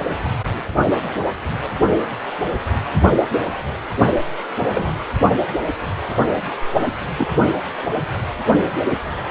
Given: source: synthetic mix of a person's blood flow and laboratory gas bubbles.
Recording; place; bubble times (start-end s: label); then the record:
Doppler ultrasound of blood flow; precordium
4.71-4.94 s: bubbles
7.17-7.28 s: bubbles
From the record:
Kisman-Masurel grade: 122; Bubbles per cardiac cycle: 1 to 2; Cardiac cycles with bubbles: 10 to 50%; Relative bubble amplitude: moderate (0.250 to 0.450); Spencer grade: 2 (many but less than half of the cardiac periods contain bubble signals, singularly or in groups); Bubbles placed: only in the low amplitude regions of the cardiac cycle